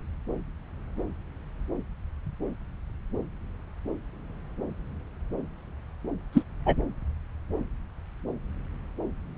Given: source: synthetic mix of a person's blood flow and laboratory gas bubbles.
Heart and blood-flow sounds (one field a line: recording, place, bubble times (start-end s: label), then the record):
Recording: Doppler ultrasound of blood flow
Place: subclavian vein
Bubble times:
6.33-6.42 s: bubbles
6.66-6.76 s: bubbles
From the record:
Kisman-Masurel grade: 112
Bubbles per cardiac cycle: 1 to 2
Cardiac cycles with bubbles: 1 to 10%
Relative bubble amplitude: moderate (0.250 to 0.450)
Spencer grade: 1 (occasional bubble signal discernible with the cardiac motion signal, with majority of cardiac periods free of bubbles)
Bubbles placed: anywhere in the cardiac cycle